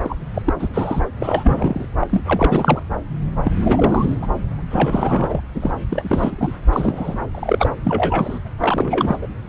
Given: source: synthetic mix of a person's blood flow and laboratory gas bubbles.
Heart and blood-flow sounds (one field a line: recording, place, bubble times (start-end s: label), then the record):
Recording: Doppler ultrasound of blood flow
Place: subclavian vein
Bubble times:
0.03-0.15 s: bubbles
0.34-0.42 s: bubbles
0.45-0.53 s: bubbles
0.59-0.68 s: bubbles
0.73-1.00 s: bubbles
1.20-1.85 s: bubbles
2.00-2.07 s: bubbles
2.09-2.20 s: bubbles
2.27-2.83 s: bubbles
3.44-3.52 s: bubbles
3.64-4.16 s: bubbles
4.22-4.27 s: bubbles
4.71-5.41 s: bubbles
5.54-5.72 s: bubbles
5.90-6.54 s: bubbles
6.72-7.25 s: bubbles
7.34-7.70 s: bubbles
7.83-8.38 s: bubbles
8.60-9.19 s: bubbles
9.22-9.27 s: bubbles
From the record:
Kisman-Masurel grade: 342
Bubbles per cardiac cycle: rolling drumbeat, 9 or more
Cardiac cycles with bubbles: 100%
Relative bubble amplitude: moderate (0.250 to 0.450)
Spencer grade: 3 (all of the cardiac periods contain showers or single bubble signals, but not dominating or overriding the cardiac motion signals)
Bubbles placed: anywhere in the cardiac cycle